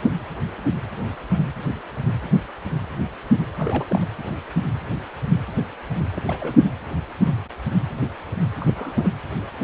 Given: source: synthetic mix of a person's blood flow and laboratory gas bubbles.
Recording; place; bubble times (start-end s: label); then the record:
Doppler ultrasound of blood flow; precordium
3.57-4.08 s: bubbles
6.15-6.23 s: bubbles
6.26-6.65 s: bubbles
8.60-9.09 s: bubbles
From the record:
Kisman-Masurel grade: 221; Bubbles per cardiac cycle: several, 3 to 8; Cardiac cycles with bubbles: 10 to 50%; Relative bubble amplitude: barely perceptible (0.100 to 0.250); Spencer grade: 2 (many but less than half of the cardiac periods contain bubble signals, singularly or in groups); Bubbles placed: anywhere in the cardiac cycle